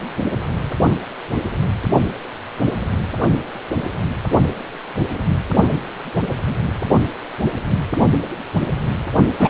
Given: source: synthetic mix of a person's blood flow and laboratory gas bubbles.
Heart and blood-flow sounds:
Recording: Doppler ultrasound of blood flow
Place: precordium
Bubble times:
9.39-9.50 s: bubbles
From the record:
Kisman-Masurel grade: 123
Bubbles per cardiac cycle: 1 to 2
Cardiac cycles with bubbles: 10 to 50%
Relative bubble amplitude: loud (0.450 to 0.775)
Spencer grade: 2 (many but less than half of the cardiac periods contain bubble signals, singularly or in groups)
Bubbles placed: only in the low amplitude regions of the cardiac cycle

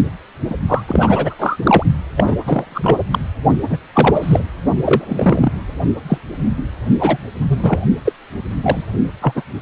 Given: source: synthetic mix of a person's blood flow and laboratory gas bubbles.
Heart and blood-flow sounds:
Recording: Doppler ultrasound of blood flow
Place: precordium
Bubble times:
0.49-0.56 s: bubbles
0.68-0.82 s: bubbles
0.88-1.35 s: bubbles
1.39-1.57 s: bubbles
1.63-1.83 s: bubbles
2.16-2.36 s: bubbles
2.44-2.98 s: bubbles
3.10-3.19 s: bubbles
3.69-3.77 s: bubbles
3.93-4.45 s: bubbles
4.84-5.53 s: bubbles
6.08-6.18 s: bubbles
6.99-7.17 s: bubbles
7.48-7.79 s: bubbles
8.05-8.12 s: bubbles
8.62-8.84 s: bubbles
9.21-9.43 s: bubbles
From the record:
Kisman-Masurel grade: 243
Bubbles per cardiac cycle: several, 3 to 8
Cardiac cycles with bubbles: 100%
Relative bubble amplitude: loud (0.450 to 0.775)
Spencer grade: 3 (all of the cardiac periods contain showers or single bubble signals, but not dominating or overriding the cardiac motion signals)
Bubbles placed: only in the low amplitude regions of the cardiac cycle

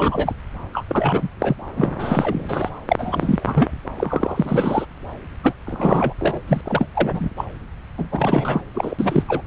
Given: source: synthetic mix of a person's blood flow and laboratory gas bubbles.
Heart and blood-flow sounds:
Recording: Doppler ultrasound of blood flow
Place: subclavian vein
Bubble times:
0.00-0.33 s: bubbles
0.72-0.84 s: bubbles
0.88-1.28 s: bubbles
1.40-1.56 s: bubbles
1.76-1.96 s: bubbles
1.98-2.70 s: bubbles
2.88-3.71 s: bubbles
3.97-4.86 s: bubbles
5.43-5.53 s: bubbles
5.66-6.13 s: bubbles
6.19-6.40 s: bubbles
6.47-6.61 s: bubbles
6.64-6.88 s: bubbles
6.95-7.29 s: bubbles
7.37-7.45 s: bubbles
7.98-8.08 s: bubbles
8.12-8.61 s: bubbles
8.74-8.95 s: bubbles
8.99-9.24 s: bubbles
9.28-9.43 s: bubbles
From the record:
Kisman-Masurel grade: 342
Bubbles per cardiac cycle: rolling drumbeat, 9 or more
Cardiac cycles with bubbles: 100%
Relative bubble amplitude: moderate (0.250 to 0.450)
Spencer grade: 3 (all of the cardiac periods contain showers or single bubble signals, but not dominating or overriding the cardiac motion signals)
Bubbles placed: anywhere in the cardiac cycle

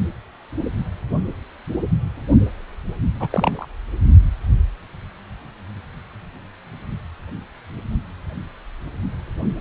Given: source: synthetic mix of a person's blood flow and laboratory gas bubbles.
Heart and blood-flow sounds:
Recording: Doppler ultrasound of blood flow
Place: precordium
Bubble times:
3.20-3.66 s: bubbles
From the record:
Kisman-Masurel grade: 112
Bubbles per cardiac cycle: 1 to 2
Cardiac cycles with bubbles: 1 to 10%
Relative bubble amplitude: moderate (0.250 to 0.450)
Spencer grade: 1 (occasional bubble signal discernible with the cardiac motion signal, with majority of cardiac periods free of bubbles)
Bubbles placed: only in the low amplitude regions of the cardiac cycle

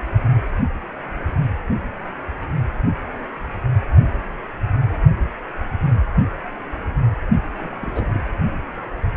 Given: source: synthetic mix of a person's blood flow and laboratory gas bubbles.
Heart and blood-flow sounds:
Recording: Doppler ultrasound of blood flow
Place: precordium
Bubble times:
7.58-8.29 s: bubbles
From the record:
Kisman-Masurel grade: 211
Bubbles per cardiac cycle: several, 3 to 8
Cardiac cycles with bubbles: 1 to 10%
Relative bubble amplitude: barely perceptible (0.100 to 0.250)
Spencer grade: 1 (occasional bubble signal discernible with the cardiac motion signal, with majority of cardiac periods free of bubbles)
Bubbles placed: only in the low amplitude regions of the cardiac cycle

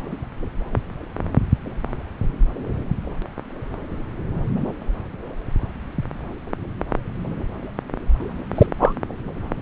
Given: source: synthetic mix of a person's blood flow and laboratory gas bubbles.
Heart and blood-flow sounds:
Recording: Doppler ultrasound of blood flow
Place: subclavian vein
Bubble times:
8.54-8.67 s: bubbles
8.79-8.93 s: bubbles
From the record:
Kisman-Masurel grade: 123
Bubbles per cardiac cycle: 1 to 2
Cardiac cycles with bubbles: 10 to 50%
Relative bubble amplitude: loud (0.450 to 0.775)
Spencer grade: 2 (many but less than half of the cardiac periods contain bubble signals, singularly or in groups)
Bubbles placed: anywhere in the cardiac cycle

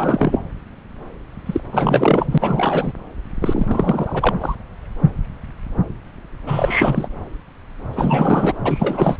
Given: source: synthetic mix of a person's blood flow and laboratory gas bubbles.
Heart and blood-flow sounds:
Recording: Doppler ultrasound of blood flow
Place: subclavian vein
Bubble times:
0.00-0.41 s: bubbles
1.46-1.61 s: bubbles
1.72-2.93 s: bubbles
3.41-4.35 s: bubbles
4.40-4.55 s: bubbles
6.46-7.08 s: bubbles
7.93-8.54 s: bubbles
8.66-9.17 s: bubbles
From the record:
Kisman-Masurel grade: 333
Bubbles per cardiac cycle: rolling drumbeat, 9 or more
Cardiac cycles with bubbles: 50 to 99%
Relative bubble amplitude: loud (0.450 to 0.775)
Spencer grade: 3 (all of the cardiac periods contain showers or single bubble signals, but not dominating or overriding the cardiac motion signals)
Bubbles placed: anywhere in the cardiac cycle

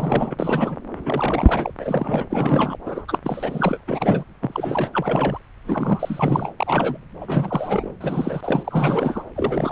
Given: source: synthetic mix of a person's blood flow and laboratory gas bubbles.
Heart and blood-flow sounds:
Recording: Doppler ultrasound of blood flow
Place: subclavian vein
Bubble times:
0.00-0.35 s: bubbles
0.39-0.76 s: bubbles
1.05-1.71 s: bubbles
1.79-2.27 s: bubbles
2.29-2.77 s: bubbles
2.85-3.05 s: bubbles
3.08-3.19 s: bubbles
3.23-3.82 s: bubbles
3.88-4.24 s: bubbles
4.42-4.89 s: bubbles
4.93-5.40 s: bubbles
5.64-6.52 s: bubbles
6.58-6.98 s: bubbles
7.21-7.92 s: bubbles
8.01-9.22 s: bubbles
9.35-9.72 s: bubbles
From the record:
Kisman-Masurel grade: 342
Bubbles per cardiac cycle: rolling drumbeat, 9 or more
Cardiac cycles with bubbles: 100%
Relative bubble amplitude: moderate (0.250 to 0.450)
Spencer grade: 3 (all of the cardiac periods contain showers or single bubble signals, but not dominating or overriding the cardiac motion signals)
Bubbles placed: anywhere in the cardiac cycle

